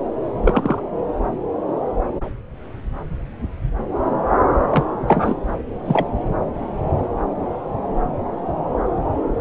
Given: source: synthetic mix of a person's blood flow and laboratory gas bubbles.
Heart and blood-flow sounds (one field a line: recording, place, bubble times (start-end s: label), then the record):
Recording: Doppler ultrasound of blood flow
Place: subclavian vein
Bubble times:
0.41-0.81 s: bubbles
4.70-4.84 s: bubbles
5.07-5.35 s: bubbles
5.85-6.06 s: bubbles
From the record:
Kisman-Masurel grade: 123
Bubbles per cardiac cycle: 1 to 2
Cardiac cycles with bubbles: 10 to 50%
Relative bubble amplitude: loud (0.450 to 0.775)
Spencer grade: 2 (many but less than half of the cardiac periods contain bubble signals, singularly or in groups)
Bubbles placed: anywhere in the cardiac cycle